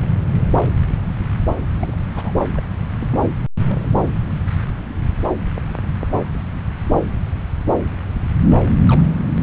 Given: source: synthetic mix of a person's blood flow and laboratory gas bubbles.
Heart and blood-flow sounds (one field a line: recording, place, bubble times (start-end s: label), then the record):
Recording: Doppler ultrasound of blood flow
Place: subclavian vein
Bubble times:
1.77-1.93 s: bubbles
2.15-2.31 s: bubbles
2.54-2.63 s: bubbles
2.99-3.06 s: bubbles
3.11-3.19 s: bubbles
3.56-3.92 s: bubbles
3.95-4.08 s: bubbles
8.65-8.70 s: bubbles
8.88-9.03 s: bubbles
From the record:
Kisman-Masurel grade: 221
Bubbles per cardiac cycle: several, 3 to 8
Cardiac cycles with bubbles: 10 to 50%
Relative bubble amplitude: barely perceptible (0.100 to 0.250)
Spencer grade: 2 (many but less than half of the cardiac periods contain bubble signals, singularly or in groups)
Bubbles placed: anywhere in the cardiac cycle